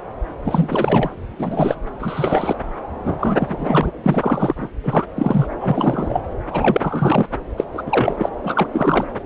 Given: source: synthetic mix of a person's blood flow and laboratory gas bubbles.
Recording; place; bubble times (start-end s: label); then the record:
Doppler ultrasound of blood flow; subclavian vein
0.44-1.10 s: bubbles
1.39-1.75 s: bubbles
1.99-2.56 s: bubbles
3.04-3.92 s: bubbles
4.03-4.68 s: bubbles
4.83-5.04 s: bubbles
5.15-5.47 s: bubbles
5.60-6.21 s: bubbles
6.50-7.26 s: bubbles
7.58-7.64 s: bubbles
7.73-7.84 s: bubbles
7.86-8.29 s: bubbles
8.44-8.67 s: bubbles
8.72-9.05 s: bubbles
From the record:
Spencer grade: 3 (all of the cardiac periods contain showers or single bubble signals, but not dominating or overriding the cardiac motion signals); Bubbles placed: anywhere in the cardiac cycle